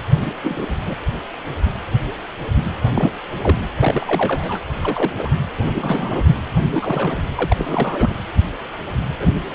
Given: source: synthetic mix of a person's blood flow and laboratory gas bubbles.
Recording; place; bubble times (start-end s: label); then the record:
Doppler ultrasound of blood flow; precordium
0.21-0.32 s: bubbles
0.44-0.67 s: bubbles
0.85-0.95 s: bubbles
2.95-3.12 s: bubbles
3.41-3.58 s: bubbles
3.79-4.60 s: bubbles
4.82-5.12 s: bubbles
5.17-5.28 s: bubbles
5.75-6.21 s: bubbles
6.66-7.17 s: bubbles
7.37-8.14 s: bubbles
9.20-9.35 s: bubbles
From the record:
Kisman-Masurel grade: 232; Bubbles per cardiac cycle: several, 3 to 8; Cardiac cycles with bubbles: 50 to 99%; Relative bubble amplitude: moderate (0.250 to 0.450); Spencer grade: 3 (all of the cardiac periods contain showers or single bubble signals, but not dominating or overriding the cardiac motion signals); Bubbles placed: anywhere in the cardiac cycle